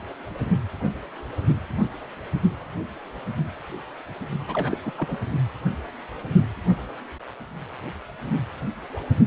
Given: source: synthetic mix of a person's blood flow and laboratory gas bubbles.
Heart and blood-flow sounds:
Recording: Doppler ultrasound of blood flow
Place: precordium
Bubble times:
4.47-4.79 s: bubbles
4.86-4.92 s: bubbles
4.98-5.18 s: bubbles
From the record:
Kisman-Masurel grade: 211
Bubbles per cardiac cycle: several, 3 to 8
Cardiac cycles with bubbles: 1 to 10%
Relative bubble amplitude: barely perceptible (0.100 to 0.250)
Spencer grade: 1 (occasional bubble signal discernible with the cardiac motion signal, with majority of cardiac periods free of bubbles)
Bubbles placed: only in the low amplitude regions of the cardiac cycle

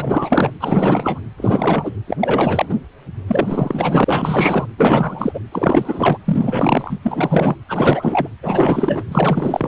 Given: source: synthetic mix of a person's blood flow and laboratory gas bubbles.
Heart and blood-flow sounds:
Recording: Doppler ultrasound of blood flow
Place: precordium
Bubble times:
0.00-0.51 s: bubbles
0.60-1.20 s: bubbles
1.38-1.92 s: bubbles
2.07-2.17 s: bubbles
2.19-2.75 s: bubbles
3.28-4.66 s: bubbles
4.77-5.40 s: bubbles
5.52-6.18 s: bubbles
6.25-6.98 s: bubbles
7.02-7.56 s: bubbles
7.68-8.28 s: bubbles
8.43-9.04 s: bubbles
9.08-9.68 s: bubbles
From the record:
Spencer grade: 4 (maximum detectable bubble signal sounding continuously throughout systole and diastole of every cardiac period, and overriding the amplitude of the normal cardiac signals)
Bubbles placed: anywhere in the cardiac cycle

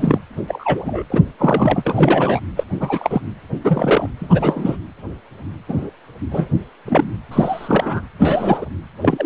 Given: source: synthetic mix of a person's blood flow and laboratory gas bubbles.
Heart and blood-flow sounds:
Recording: Doppler ultrasound of blood flow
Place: precordium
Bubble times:
0.00-0.19 s: bubbles
0.48-1.03 s: bubbles
1.10-1.22 s: bubbles
1.39-2.40 s: bubbles
2.57-2.63 s: bubbles
2.80-3.21 s: bubbles
3.63-4.08 s: bubbles
4.18-4.76 s: bubbles
5.68-5.89 s: bubbles
6.31-6.48 s: bubbles
6.85-7.11 s: bubbles
7.31-8.02 s: bubbles
8.19-8.65 s: bubbles
9.02-9.26 s: bubbles
From the record:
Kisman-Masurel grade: 243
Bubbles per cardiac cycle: several, 3 to 8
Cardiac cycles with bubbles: 100%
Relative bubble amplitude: loud (0.450 to 0.775)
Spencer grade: 3 (all of the cardiac periods contain showers or single bubble signals, but not dominating or overriding the cardiac motion signals)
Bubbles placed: anywhere in the cardiac cycle

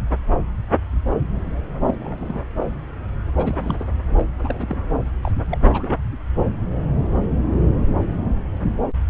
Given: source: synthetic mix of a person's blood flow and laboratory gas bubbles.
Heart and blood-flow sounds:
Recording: Doppler ultrasound of blood flow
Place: subclavian vein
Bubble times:
1.86-1.94 s: bubbles
1.99-2.39 s: bubbles
3.38-3.75 s: bubbles
3.79-3.85 s: bubbles
4.18-4.24 s: bubbles
4.38-4.75 s: bubbles
5.24-5.31 s: bubbles
5.50-5.97 s: bubbles
From the record:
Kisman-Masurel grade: 221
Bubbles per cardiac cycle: several, 3 to 8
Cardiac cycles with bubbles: 10 to 50%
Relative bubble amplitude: barely perceptible (0.100 to 0.250)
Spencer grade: 2 (many but less than half of the cardiac periods contain bubble signals, singularly or in groups)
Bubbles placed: anywhere in the cardiac cycle

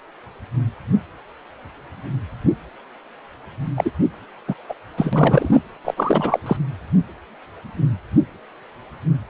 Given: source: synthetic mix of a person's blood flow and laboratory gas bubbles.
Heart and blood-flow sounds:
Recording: Doppler ultrasound of blood flow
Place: precordium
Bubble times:
3.75-3.91 s: bubbles
4.48-4.54 s: bubbles
4.69-4.74 s: bubbles
4.97-5.61 s: bubbles
5.84-5.94 s: bubbles
5.96-6.40 s: bubbles
6.46-6.57 s: bubbles
From the record:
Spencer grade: 2 (many but less than half of the cardiac periods contain bubble signals, singularly or in groups)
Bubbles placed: anywhere in the cardiac cycle

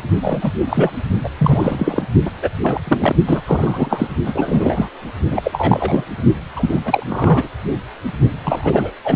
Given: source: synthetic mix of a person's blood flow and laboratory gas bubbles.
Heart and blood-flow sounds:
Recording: Doppler ultrasound of blood flow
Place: precordium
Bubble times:
0.22-0.51 s: bubbles
0.69-0.92 s: bubbles
1.23-1.28 s: bubbles
1.38-2.04 s: bubbles
2.25-2.31 s: bubbles
2.42-2.50 s: bubbles
2.62-2.81 s: bubbles
2.87-3.16 s: bubbles
3.26-3.41 s: bubbles
3.46-4.08 s: bubbles
4.26-4.89 s: bubbles
5.30-6.05 s: bubbles
6.56-6.82 s: bubbles
6.85-7.03 s: bubbles
7.08-7.48 s: bubbles
8.44-8.92 s: bubbles
9.04-9.16 s: bubbles
From the record:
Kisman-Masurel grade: 343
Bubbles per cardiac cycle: rolling drumbeat, 9 or more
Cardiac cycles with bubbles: 100%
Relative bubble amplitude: loud (0.450 to 0.775)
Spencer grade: 3 (all of the cardiac periods contain showers or single bubble signals, but not dominating or overriding the cardiac motion signals)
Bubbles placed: only in the low amplitude regions of the cardiac cycle

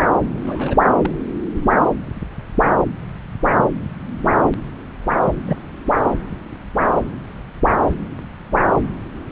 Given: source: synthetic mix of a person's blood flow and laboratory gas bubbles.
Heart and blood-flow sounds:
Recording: Doppler ultrasound of blood flow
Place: subclavian vein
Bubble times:
0.43-0.76 s: bubbles
1.02-1.10 s: bubbles
5.46-5.57 s: bubbles
From the record:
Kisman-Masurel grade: 122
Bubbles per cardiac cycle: 1 to 2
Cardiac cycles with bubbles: 10 to 50%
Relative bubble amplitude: moderate (0.250 to 0.450)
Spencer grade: 2 (many but less than half of the cardiac periods contain bubble signals, singularly or in groups)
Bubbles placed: anywhere in the cardiac cycle

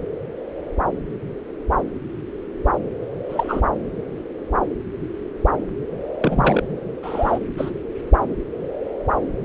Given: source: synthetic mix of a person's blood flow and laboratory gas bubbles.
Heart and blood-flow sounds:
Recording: Doppler ultrasound of blood flow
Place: subclavian vein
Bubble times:
3.29-3.62 s: bubbles
6.20-6.63 s: bubbles
7.03-7.39 s: bubbles
7.57-7.71 s: bubbles
From the record:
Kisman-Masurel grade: 222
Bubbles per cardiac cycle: several, 3 to 8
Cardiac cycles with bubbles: 10 to 50%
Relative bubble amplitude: moderate (0.250 to 0.450)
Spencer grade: 2 (many but less than half of the cardiac periods contain bubble signals, singularly or in groups)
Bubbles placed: anywhere in the cardiac cycle

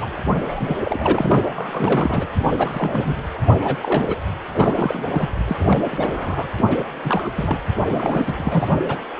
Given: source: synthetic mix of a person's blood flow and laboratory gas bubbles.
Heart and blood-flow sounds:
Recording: Doppler ultrasound of blood flow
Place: precordium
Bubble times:
0.01-0.10 s: bubbles
0.44-0.76 s: bubbles
0.83-1.39 s: bubbles
1.54-2.27 s: bubbles
2.38-2.52 s: bubbles
2.58-3.17 s: bubbles
3.54-4.16 s: bubbles
4.53-5.29 s: bubbles
5.46-6.47 s: bubbles
6.57-6.64 s: bubbles
6.68-6.84 s: bubbles
6.93-7.29 s: bubbles
7.35-7.58 s: bubbles
7.88-8.80 s: bubbles
8.88-8.96 s: bubbles
From the record:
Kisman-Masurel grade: 342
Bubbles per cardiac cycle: rolling drumbeat, 9 or more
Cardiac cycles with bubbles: 100%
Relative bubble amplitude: moderate (0.250 to 0.450)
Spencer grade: 3 (all of the cardiac periods contain showers or single bubble signals, but not dominating or overriding the cardiac motion signals)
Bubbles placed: anywhere in the cardiac cycle

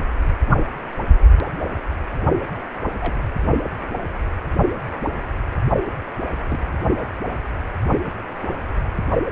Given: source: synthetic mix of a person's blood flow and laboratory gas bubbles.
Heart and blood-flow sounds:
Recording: Doppler ultrasound of blood flow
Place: precordium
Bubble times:
3.00-3.16 s: bubbles
6.51-6.72 s: bubbles
From the record:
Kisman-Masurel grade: 121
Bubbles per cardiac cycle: 1 to 2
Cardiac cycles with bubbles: 10 to 50%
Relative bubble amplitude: barely perceptible (0.100 to 0.250)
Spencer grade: 2 (many but less than half of the cardiac periods contain bubble signals, singularly or in groups)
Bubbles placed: only in the low amplitude regions of the cardiac cycle

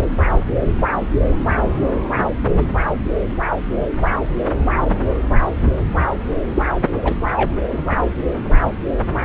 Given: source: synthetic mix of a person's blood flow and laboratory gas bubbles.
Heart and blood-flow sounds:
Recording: Doppler ultrasound of blood flow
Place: subclavian vein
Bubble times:
6.55-6.62 s: bubbles
7.04-7.14 s: bubbles
7.36-7.54 s: bubbles
From the record:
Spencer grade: 1 (occasional bubble signal discernible with the cardiac motion signal, with majority of cardiac periods free of bubbles)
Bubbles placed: anywhere in the cardiac cycle

